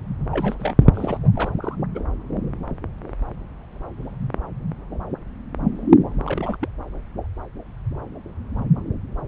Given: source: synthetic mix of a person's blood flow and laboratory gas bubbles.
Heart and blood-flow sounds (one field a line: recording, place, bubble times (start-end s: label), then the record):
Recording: Doppler ultrasound of blood flow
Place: subclavian vein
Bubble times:
0.31-0.74 s: bubbles
0.80-0.87 s: bubbles
0.94-1.18 s: bubbles
1.23-1.31 s: bubbles
1.33-1.51 s: bubbles
1.61-1.75 s: bubbles
1.94-1.99 s: bubbles
6.24-6.57 s: bubbles
6.61-6.68 s: bubbles
From the record:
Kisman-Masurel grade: 221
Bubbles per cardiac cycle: several, 3 to 8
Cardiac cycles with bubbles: 10 to 50%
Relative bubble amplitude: barely perceptible (0.100 to 0.250)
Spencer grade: 2 (many but less than half of the cardiac periods contain bubble signals, singularly or in groups)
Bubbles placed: anywhere in the cardiac cycle